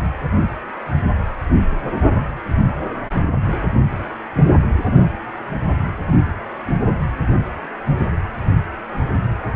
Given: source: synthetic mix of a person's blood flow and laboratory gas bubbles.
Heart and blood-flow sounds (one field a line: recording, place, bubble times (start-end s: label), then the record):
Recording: Doppler ultrasound of blood flow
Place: precordium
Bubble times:
no bubbles
From the record:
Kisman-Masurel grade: 000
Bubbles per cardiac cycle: 0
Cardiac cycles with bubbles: 0%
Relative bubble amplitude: no bubbles discernible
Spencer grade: 0 (complete lack of bubble signals)